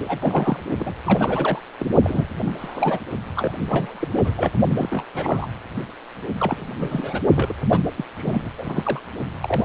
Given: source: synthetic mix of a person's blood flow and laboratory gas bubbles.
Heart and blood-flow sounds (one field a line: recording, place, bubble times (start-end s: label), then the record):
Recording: Doppler ultrasound of blood flow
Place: precordium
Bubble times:
0.00-0.59 s: bubbles
0.79-0.94 s: bubbles
1.05-1.60 s: bubbles
1.79-1.88 s: bubbles
2.03-2.26 s: bubbles
2.45-2.99 s: bubbles
3.35-3.52 s: bubbles
3.68-4.08 s: bubbles
4.14-4.35 s: bubbles
4.38-4.50 s: bubbles
4.69-5.04 s: bubbles
5.13-5.47 s: bubbles
6.38-6.67 s: bubbles
6.80-7.21 s: bubbles
7.35-7.53 s: bubbles
7.71-7.82 s: bubbles
7.97-8.05 s: bubbles
8.17-8.50 s: bubbles
8.58-9.01 s: bubbles
9.41-9.65 s: bubbles
From the record:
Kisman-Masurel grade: 342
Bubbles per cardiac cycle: rolling drumbeat, 9 or more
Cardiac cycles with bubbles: 100%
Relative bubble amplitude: moderate (0.250 to 0.450)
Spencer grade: 3 (all of the cardiac periods contain showers or single bubble signals, but not dominating or overriding the cardiac motion signals)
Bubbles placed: only in the low amplitude regions of the cardiac cycle